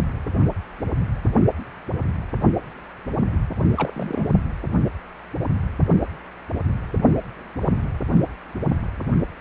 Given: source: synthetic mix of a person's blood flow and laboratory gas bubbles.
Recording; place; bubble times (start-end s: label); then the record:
Doppler ultrasound of blood flow; precordium
3.75-4.29 s: bubbles
From the record:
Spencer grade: 1 (occasional bubble signal discernible with the cardiac motion signal, with majority of cardiac periods free of bubbles); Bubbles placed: only in the low amplitude regions of the cardiac cycle